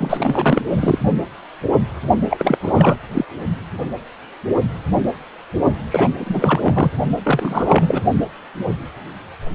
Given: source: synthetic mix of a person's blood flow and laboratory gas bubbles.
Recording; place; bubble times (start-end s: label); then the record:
Doppler ultrasound of blood flow; precordium
0.00-0.62 s: bubbles
0.72-0.99 s: bubbles
2.30-2.58 s: bubbles
2.60-2.97 s: bubbles
3.14-3.25 s: bubbles
5.91-6.90 s: bubbles
7.23-8.03 s: bubbles
From the record:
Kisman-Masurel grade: 333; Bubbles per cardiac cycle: rolling drumbeat, 9 or more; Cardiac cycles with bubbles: 50 to 99%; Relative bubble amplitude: loud (0.450 to 0.775); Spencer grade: 3 (all of the cardiac periods contain showers or single bubble signals, but not dominating or overriding the cardiac motion signals); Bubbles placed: only in the low amplitude regions of the cardiac cycle